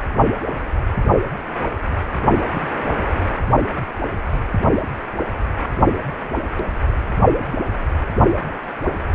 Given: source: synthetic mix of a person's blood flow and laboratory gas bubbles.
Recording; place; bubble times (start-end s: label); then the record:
Doppler ultrasound of blood flow; precordium
2.53-2.68 s: bubbles
From the record:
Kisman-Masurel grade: 121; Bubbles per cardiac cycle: 1 to 2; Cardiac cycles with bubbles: 10 to 50%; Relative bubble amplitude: barely perceptible (0.100 to 0.250); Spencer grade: 2 (many but less than half of the cardiac periods contain bubble signals, singularly or in groups); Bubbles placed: anywhere in the cardiac cycle